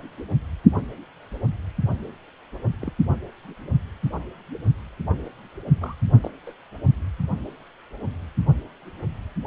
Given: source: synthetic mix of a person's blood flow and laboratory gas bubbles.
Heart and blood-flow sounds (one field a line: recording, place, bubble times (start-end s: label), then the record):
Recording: Doppler ultrasound of blood flow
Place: precordium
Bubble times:
2.81-2.92 s: bubbles
5.81-5.95 s: bubbles
6.21-6.31 s: bubbles
6.46-6.54 s: bubbles
From the record:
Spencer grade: 2 (many but less than half of the cardiac periods contain bubble signals, singularly or in groups)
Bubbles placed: only in the low amplitude regions of the cardiac cycle